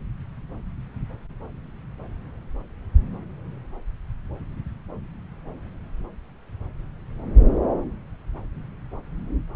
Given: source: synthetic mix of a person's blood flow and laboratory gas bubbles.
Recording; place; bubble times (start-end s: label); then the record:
Doppler ultrasound of blood flow; subclavian vein
no bubbles
From the record:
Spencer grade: 0 (complete lack of bubble signals)